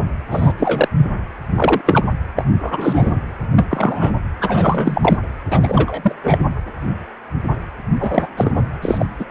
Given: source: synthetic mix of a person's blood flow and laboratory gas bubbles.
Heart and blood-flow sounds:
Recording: Doppler ultrasound of blood flow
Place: precordium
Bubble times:
0.00-0.06 s: bubbles
0.30-0.53 s: bubbles
0.58-0.88 s: bubbles
0.98-1.12 s: bubbles
1.55-1.82 s: bubbles
1.86-2.06 s: bubbles
2.36-2.45 s: bubbles
2.62-3.12 s: bubbles
3.55-4.12 s: bubbles
4.41-5.17 s: bubbles
5.50-6.15 s: bubbles
6.24-6.38 s: bubbles
8.00-8.28 s: bubbles
8.37-8.62 s: bubbles
8.82-9.09 s: bubbles
9.18-9.25 s: bubbles
From the record:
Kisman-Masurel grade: 233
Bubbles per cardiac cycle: several, 3 to 8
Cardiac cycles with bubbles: 50 to 99%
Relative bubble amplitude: loud (0.450 to 0.775)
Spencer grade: 3 (all of the cardiac periods contain showers or single bubble signals, but not dominating or overriding the cardiac motion signals)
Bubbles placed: anywhere in the cardiac cycle

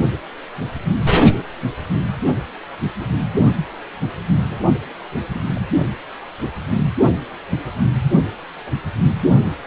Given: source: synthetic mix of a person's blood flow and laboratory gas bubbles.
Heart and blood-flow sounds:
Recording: Doppler ultrasound of blood flow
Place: precordium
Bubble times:
2.99-3.06 s: bubbles
3.18-3.27 s: bubbles
4.38-4.62 s: bubbles
5.34-5.40 s: bubbles
5.54-5.60 s: bubbles
From the record:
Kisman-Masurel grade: 121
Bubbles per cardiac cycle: 1 to 2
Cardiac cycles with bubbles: 10 to 50%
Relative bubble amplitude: barely perceptible (0.100 to 0.250)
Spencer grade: 2 (many but less than half of the cardiac periods contain bubble signals, singularly or in groups)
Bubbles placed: only in the low amplitude regions of the cardiac cycle

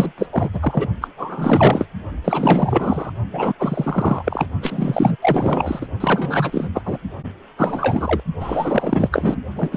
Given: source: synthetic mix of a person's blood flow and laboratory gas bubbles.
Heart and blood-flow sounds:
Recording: Doppler ultrasound of blood flow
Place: precordium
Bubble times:
0.00-0.12 s: bubbles
0.18-0.27 s: bubbles
0.32-0.50 s: bubbles
0.53-0.88 s: bubbles
1.01-1.07 s: bubbles
1.17-1.88 s: bubbles
2.24-3.12 s: bubbles
3.32-3.53 s: bubbles
3.59-4.47 s: bubbles
4.60-5.16 s: bubbles
5.21-5.88 s: bubbles
6.00-6.69 s: bubbles
6.74-6.81 s: bubbles
6.85-6.98 s: bubbles
7.58-8.20 s: bubbles
8.40-9.37 s: bubbles
9.56-9.77 s: bubbles
From the record:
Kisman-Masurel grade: 444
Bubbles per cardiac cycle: continuous sound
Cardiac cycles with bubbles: 100%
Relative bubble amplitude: maximal (0.775 to 0.999)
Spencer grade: 4 (maximum detectable bubble signal sounding continuously throughout systole and diastole of every cardiac period, and overriding the amplitude of the normal cardiac signals)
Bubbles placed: only in the low amplitude regions of the cardiac cycle

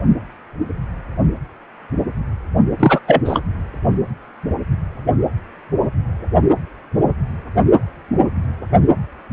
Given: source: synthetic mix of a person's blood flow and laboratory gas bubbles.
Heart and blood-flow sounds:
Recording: Doppler ultrasound of blood flow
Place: precordium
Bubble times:
2.79-3.00 s: bubbles
3.07-3.41 s: bubbles
From the record:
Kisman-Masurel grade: 213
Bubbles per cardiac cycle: several, 3 to 8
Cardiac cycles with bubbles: 1 to 10%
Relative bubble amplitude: loud (0.450 to 0.775)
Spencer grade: 1 (occasional bubble signal discernible with the cardiac motion signal, with majority of cardiac periods free of bubbles)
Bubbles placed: anywhere in the cardiac cycle

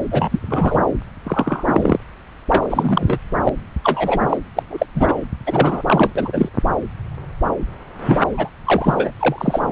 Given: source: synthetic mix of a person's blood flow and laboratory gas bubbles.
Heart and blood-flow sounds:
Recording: Doppler ultrasound of blood flow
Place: subclavian vein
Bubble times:
0.11-0.80 s: bubbles
1.24-1.64 s: bubbles
1.68-1.97 s: bubbles
2.49-2.68 s: bubbles
2.70-3.19 s: bubbles
3.45-3.50 s: bubbles
3.83-4.20 s: bubbles
4.29-4.37 s: bubbles
4.56-4.63 s: bubbles
4.70-4.86 s: bubbles
4.95-5.13 s: bubbles
5.45-5.82 s: bubbles
5.86-6.12 s: bubbles
6.16-6.49 s: bubbles
8.03-8.24 s: bubbles
8.31-8.50 s: bubbles
8.64-9.13 s: bubbles
9.19-9.62 s: bubbles
From the record:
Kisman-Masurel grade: 243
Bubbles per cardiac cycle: several, 3 to 8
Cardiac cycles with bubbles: 100%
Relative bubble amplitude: loud (0.450 to 0.775)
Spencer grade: 3 (all of the cardiac periods contain showers or single bubble signals, but not dominating or overriding the cardiac motion signals)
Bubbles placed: anywhere in the cardiac cycle

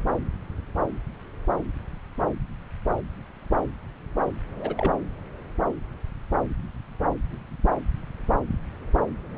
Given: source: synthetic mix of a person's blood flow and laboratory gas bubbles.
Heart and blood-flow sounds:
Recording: Doppler ultrasound of blood flow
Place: subclavian vein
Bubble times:
4.59-4.74 s: bubbles
4.77-4.92 s: bubbles
From the record:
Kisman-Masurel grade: 111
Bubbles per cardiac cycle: 1 to 2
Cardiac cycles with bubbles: 1 to 10%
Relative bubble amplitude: barely perceptible (0.100 to 0.250)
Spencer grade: 1 (occasional bubble signal discernible with the cardiac motion signal, with majority of cardiac periods free of bubbles)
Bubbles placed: anywhere in the cardiac cycle

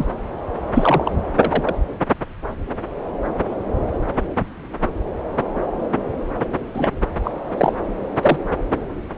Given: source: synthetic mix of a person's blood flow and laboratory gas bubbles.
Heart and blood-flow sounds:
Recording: Doppler ultrasound of blood flow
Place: subclavian vein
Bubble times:
0.00-0.07 s: bubbles
0.74-1.15 s: bubbles
1.38-1.75 s: bubbles
6.74-6.93 s: bubbles
7.24-7.31 s: bubbles
7.57-7.73 s: bubbles
8.21-8.38 s: bubbles
From the record:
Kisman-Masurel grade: 123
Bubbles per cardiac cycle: 1 to 2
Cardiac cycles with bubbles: 10 to 50%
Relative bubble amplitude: loud (0.450 to 0.775)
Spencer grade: 2 (many but less than half of the cardiac periods contain bubble signals, singularly or in groups)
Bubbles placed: anywhere in the cardiac cycle

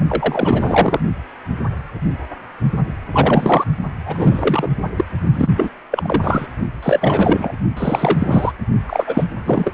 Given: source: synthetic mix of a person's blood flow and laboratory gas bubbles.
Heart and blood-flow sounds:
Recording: Doppler ultrasound of blood flow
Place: precordium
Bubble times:
0.08-1.00 s: bubbles
3.12-3.65 s: bubbles
4.06-4.69 s: bubbles
4.97-5.04 s: bubbles
5.33-5.49 s: bubbles
5.56-5.70 s: bubbles
5.91-6.46 s: bubbles
6.83-7.52 s: bubbles
7.76-8.52 s: bubbles
8.86-9.24 s: bubbles
9.46-9.72 s: bubbles
From the record:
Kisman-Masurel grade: 333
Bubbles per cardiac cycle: rolling drumbeat, 9 or more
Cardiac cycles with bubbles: 50 to 99%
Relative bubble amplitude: loud (0.450 to 0.775)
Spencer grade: 3 (all of the cardiac periods contain showers or single bubble signals, but not dominating or overriding the cardiac motion signals)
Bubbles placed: only in the low amplitude regions of the cardiac cycle

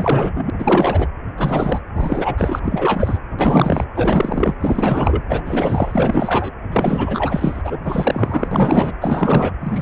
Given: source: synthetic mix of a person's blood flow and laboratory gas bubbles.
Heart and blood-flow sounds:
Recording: Doppler ultrasound of blood flow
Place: precordium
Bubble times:
0.00-0.50 s: bubbles
0.59-1.08 s: bubbles
1.37-1.81 s: bubbles
1.97-2.60 s: bubbles
2.64-3.19 s: bubbles
3.39-3.85 s: bubbles
3.95-4.54 s: bubbles
4.61-5.23 s: bubbles
5.29-6.50 s: bubbles
6.71-7.61 s: bubbles
7.64-8.47 s: bubbles
8.51-8.95 s: bubbles
9.01-9.53 s: bubbles
9.61-9.82 s: bubbles
From the record:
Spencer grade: 4 (maximum detectable bubble signal sounding continuously throughout systole and diastole of every cardiac period, and overriding the amplitude of the normal cardiac signals)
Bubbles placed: anywhere in the cardiac cycle

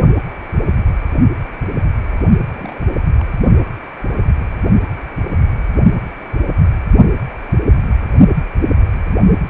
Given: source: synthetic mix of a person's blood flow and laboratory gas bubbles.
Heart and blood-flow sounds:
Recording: Doppler ultrasound of blood flow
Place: precordium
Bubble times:
2.53-2.99 s: bubbles
3.19-3.23 s: bubbles
From the record:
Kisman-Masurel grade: 211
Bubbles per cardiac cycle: several, 3 to 8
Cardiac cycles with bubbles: 1 to 10%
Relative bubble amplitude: barely perceptible (0.100 to 0.250)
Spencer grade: 1 (occasional bubble signal discernible with the cardiac motion signal, with majority of cardiac periods free of bubbles)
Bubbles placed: only in the low amplitude regions of the cardiac cycle

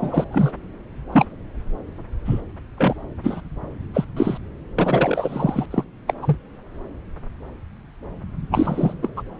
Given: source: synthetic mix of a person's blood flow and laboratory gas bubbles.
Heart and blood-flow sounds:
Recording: Doppler ultrasound of blood flow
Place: subclavian vein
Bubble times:
0.00-0.24 s: bubbles
0.32-0.52 s: bubbles
1.12-1.25 s: bubbles
2.25-2.41 s: bubbles
2.77-2.94 s: bubbles
3.24-3.41 s: bubbles
3.94-4.05 s: bubbles
4.17-4.38 s: bubbles
4.76-5.66 s: bubbles
5.71-5.84 s: bubbles
6.07-6.13 s: bubbles
6.22-6.37 s: bubbles
8.51-8.93 s: bubbles
9.02-9.09 s: bubbles
9.16-9.22 s: bubbles
From the record:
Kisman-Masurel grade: 232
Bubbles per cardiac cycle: several, 3 to 8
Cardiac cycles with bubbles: 50 to 99%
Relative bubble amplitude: moderate (0.250 to 0.450)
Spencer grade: 3 (all of the cardiac periods contain showers or single bubble signals, but not dominating or overriding the cardiac motion signals)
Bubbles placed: anywhere in the cardiac cycle

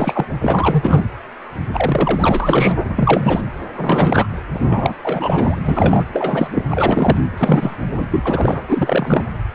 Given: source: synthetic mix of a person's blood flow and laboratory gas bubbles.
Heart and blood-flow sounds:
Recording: Doppler ultrasound of blood flow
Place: precordium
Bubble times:
0.00-0.26 s: bubbles
0.41-1.03 s: bubbles
1.73-2.78 s: bubbles
2.96-3.41 s: bubbles
3.77-4.28 s: bubbles
4.52-4.95 s: bubbles
5.02-5.60 s: bubbles
5.63-6.04 s: bubbles
6.13-6.65 s: bubbles
6.70-7.17 s: bubbles
7.38-7.77 s: bubbles
7.94-8.06 s: bubbles
8.11-8.62 s: bubbles
8.68-9.24 s: bubbles
From the record:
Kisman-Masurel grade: 333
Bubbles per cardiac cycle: rolling drumbeat, 9 or more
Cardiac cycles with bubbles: 50 to 99%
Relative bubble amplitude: loud (0.450 to 0.775)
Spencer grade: 3 (all of the cardiac periods contain showers or single bubble signals, but not dominating or overriding the cardiac motion signals)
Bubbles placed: anywhere in the cardiac cycle

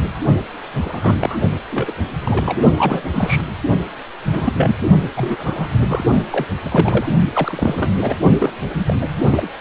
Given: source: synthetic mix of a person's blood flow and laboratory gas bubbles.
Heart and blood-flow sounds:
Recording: Doppler ultrasound of blood flow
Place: precordium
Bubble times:
0.02-0.08 s: bubbles
0.79-1.37 s: bubbles
1.72-1.92 s: bubbles
2.25-2.60 s: bubbles
2.77-3.04 s: bubbles
3.12-3.42 s: bubbles
4.32-4.53 s: bubbles
4.57-4.75 s: bubbles
5.17-5.37 s: bubbles
5.40-5.68 s: bubbles
5.88-6.04 s: bubbles
6.30-6.47 s: bubbles
6.63-7.07 s: bubbles
7.33-8.16 s: bubbles
8.38-8.53 s: bubbles
8.79-8.96 s: bubbles
9.01-9.05 s: bubbles
9.23-9.48 s: bubbles
From the record:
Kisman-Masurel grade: 242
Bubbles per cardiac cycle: several, 3 to 8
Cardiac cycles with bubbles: 100%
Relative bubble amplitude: moderate (0.250 to 0.450)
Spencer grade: 3 (all of the cardiac periods contain showers or single bubble signals, but not dominating or overriding the cardiac motion signals)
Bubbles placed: only in the low amplitude regions of the cardiac cycle

